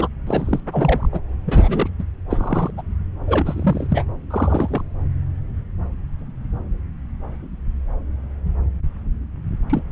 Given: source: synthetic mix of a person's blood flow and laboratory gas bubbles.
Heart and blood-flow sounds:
Doppler ultrasound of blood flow; subclavian vein
0.00-0.08 s: bubbles
0.26-0.60 s: bubbles
0.71-1.08 s: bubbles
1.11-1.21 s: bubbles
1.47-1.89 s: bubbles
1.98-2.04 s: bubbles
2.30-2.71 s: bubbles
2.77-2.82 s: bubbles
3.27-4.05 s: bubbles
4.30-4.82 s: bubbles
9.70-9.83 s: bubbles
From the record:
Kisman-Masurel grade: 332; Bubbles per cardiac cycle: rolling drumbeat, 9 or more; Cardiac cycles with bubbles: 50 to 99%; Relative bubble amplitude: moderate (0.250 to 0.450); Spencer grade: 3 (all of the cardiac periods contain showers or single bubble signals, but not dominating or overriding the cardiac motion signals); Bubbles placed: anywhere in the cardiac cycle

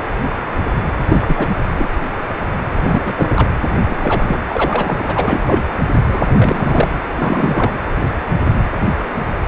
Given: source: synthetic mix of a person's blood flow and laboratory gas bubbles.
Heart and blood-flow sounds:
Doppler ultrasound of blood flow; precordium
0.98-1.05 s: bubbles
1.09-1.47 s: bubbles
1.69-1.88 s: bubbles
2.73-3.50 s: bubbles
3.89-4.38 s: bubbles
4.49-4.94 s: bubbles
4.99-5.04 s: bubbles
5.06-5.63 s: bubbles
6.08-6.88 s: bubbles
7.17-7.71 s: bubbles
From the record:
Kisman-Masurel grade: 332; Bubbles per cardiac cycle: rolling drumbeat, 9 or more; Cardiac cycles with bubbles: 50 to 99%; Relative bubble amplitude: moderate (0.250 to 0.450); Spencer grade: 3 (all of the cardiac periods contain showers or single bubble signals, but not dominating or overriding the cardiac motion signals); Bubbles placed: anywhere in the cardiac cycle

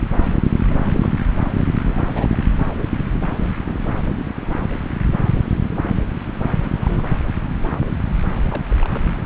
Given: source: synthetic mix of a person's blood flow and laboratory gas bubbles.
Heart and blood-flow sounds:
Doppler ultrasound of blood flow; subclavian vein
0.70-0.77 s: bubbles
0.84-1.09 s: bubbles
1.85-2.28 s: bubbles
2.31-2.36 s: bubbles
6.75-7.05 s: bubbles
8.50-8.64 s: bubbles
8.70-9.05 s: bubbles
9.17-9.26 s: bubbles
From the record:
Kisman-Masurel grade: 221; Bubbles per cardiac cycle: several, 3 to 8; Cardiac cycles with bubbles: 10 to 50%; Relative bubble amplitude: barely perceptible (0.100 to 0.250); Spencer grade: 2 (many but less than half of the cardiac periods contain bubble signals, singularly or in groups); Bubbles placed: anywhere in the cardiac cycle

